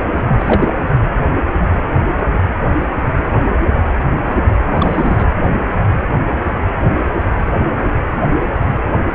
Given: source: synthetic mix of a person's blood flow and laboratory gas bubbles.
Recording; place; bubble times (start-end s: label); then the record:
Doppler ultrasound of blood flow; precordium
0.17-0.22 s: bubbles
0.28-0.73 s: bubbles
4.75-5.28 s: bubbles
From the record:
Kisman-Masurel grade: 222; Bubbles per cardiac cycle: several, 3 to 8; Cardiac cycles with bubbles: 10 to 50%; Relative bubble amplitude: moderate (0.250 to 0.450); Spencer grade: 2 (many but less than half of the cardiac periods contain bubble signals, singularly or in groups); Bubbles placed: anywhere in the cardiac cycle